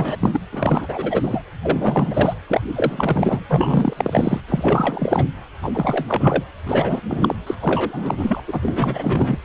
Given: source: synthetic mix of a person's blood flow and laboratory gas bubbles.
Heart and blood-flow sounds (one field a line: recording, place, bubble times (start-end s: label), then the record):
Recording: Doppler ultrasound of blood flow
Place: precordium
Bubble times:
0.00-0.16 s: bubbles
0.20-0.40 s: bubbles
0.52-1.42 s: bubbles
1.63-2.34 s: bubbles
2.47-2.61 s: bubbles
2.75-3.44 s: bubbles
3.49-3.94 s: bubbles
3.96-4.41 s: bubbles
4.48-5.24 s: bubbles
5.62-5.71 s: bubbles
5.74-6.05 s: bubbles
6.08-6.44 s: bubbles
6.66-7.00 s: bubbles
7.08-7.35 s: bubbles
7.46-7.54 s: bubbles
7.60-8.42 s: bubbles
8.47-9.37 s: bubbles
From the record:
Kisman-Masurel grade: 343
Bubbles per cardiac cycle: rolling drumbeat, 9 or more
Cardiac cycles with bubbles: 100%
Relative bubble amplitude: loud (0.450 to 0.775)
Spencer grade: 3 (all of the cardiac periods contain showers or single bubble signals, but not dominating or overriding the cardiac motion signals)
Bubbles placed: anywhere in the cardiac cycle